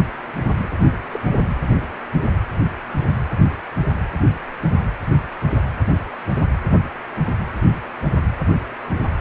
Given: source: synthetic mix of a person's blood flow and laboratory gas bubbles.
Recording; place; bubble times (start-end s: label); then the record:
Doppler ultrasound of blood flow; precordium
0.70-0.78 s: bubbles
1.12-1.19 s: bubbles
From the record:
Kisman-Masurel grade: 112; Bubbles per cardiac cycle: 1 to 2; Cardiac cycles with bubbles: 1 to 10%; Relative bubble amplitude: moderate (0.250 to 0.450); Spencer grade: 1 (occasional bubble signal discernible with the cardiac motion signal, with majority of cardiac periods free of bubbles); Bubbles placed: anywhere in the cardiac cycle